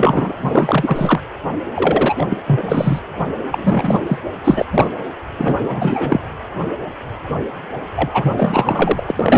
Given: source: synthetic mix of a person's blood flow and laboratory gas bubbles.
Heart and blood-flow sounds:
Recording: Doppler ultrasound of blood flow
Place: precordium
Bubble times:
0.00-0.33 s: bubbles
0.37-1.20 s: bubbles
1.75-2.25 s: bubbles
2.30-2.38 s: bubbles
2.45-2.99 s: bubbles
3.50-4.00 s: bubbles
4.06-4.18 s: bubbles
4.44-4.66 s: bubbles
4.72-4.91 s: bubbles
5.38-5.58 s: bubbles
5.60-6.21 s: bubbles
7.96-8.11 s: bubbles
8.13-9.03 s: bubbles
9.08-9.12 s: bubbles
9.15-9.38 s: bubbles
From the record:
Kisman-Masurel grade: 333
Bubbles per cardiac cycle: rolling drumbeat, 9 or more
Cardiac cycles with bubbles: 50 to 99%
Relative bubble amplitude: loud (0.450 to 0.775)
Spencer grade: 3 (all of the cardiac periods contain showers or single bubble signals, but not dominating or overriding the cardiac motion signals)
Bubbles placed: anywhere in the cardiac cycle

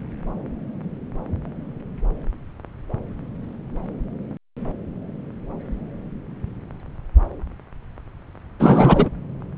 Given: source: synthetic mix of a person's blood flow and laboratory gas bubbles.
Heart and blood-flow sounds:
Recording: Doppler ultrasound of blood flow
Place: subclavian vein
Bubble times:
8.60-9.09 s: bubbles
From the record:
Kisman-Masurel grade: 223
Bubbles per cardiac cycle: several, 3 to 8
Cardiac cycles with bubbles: 10 to 50%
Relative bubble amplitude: loud (0.450 to 0.775)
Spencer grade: 2 (many but less than half of the cardiac periods contain bubble signals, singularly or in groups)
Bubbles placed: anywhere in the cardiac cycle

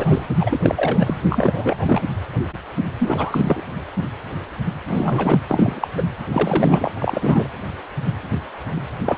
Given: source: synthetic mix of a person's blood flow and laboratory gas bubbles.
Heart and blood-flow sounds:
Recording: Doppler ultrasound of blood flow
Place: precordium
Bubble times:
0.00-0.26 s: bubbles
0.40-0.59 s: bubbles
0.62-1.20 s: bubbles
1.30-2.02 s: bubbles
3.00-3.64 s: bubbles
4.88-5.38 s: bubbles
5.47-5.88 s: bubbles
5.95-6.02 s: bubbles
6.32-6.91 s: bubbles
6.95-7.47 s: bubbles
9.06-9.18 s: bubbles
From the record:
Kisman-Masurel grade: 332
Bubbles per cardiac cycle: rolling drumbeat, 9 or more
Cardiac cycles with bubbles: 50 to 99%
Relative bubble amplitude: moderate (0.250 to 0.450)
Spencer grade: 3 (all of the cardiac periods contain showers or single bubble signals, but not dominating or overriding the cardiac motion signals)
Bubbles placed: anywhere in the cardiac cycle

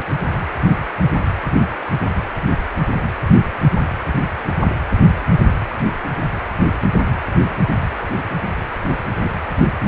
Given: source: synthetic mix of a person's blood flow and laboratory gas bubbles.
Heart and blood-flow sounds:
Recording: Doppler ultrasound of blood flow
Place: precordium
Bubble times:
9.23-9.31 s: bubbles
9.46-9.51 s: bubbles
From the record:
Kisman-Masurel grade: 111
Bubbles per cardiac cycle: 1 to 2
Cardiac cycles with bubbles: 1 to 10%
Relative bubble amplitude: barely perceptible (0.100 to 0.250)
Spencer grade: 1 (occasional bubble signal discernible with the cardiac motion signal, with majority of cardiac periods free of bubbles)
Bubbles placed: anywhere in the cardiac cycle

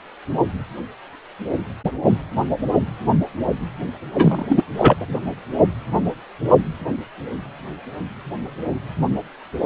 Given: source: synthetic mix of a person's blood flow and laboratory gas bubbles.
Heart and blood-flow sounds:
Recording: Doppler ultrasound of blood flow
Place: precordium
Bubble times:
4.12-4.46 s: bubbles
4.49-4.62 s: bubbles
4.76-4.96 s: bubbles
5.00-5.06 s: bubbles
From the record:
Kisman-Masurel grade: 213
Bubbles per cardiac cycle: several, 3 to 8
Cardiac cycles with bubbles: 1 to 10%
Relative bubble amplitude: loud (0.450 to 0.775)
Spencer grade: 1 (occasional bubble signal discernible with the cardiac motion signal, with majority of cardiac periods free of bubbles)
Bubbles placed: only in the low amplitude regions of the cardiac cycle

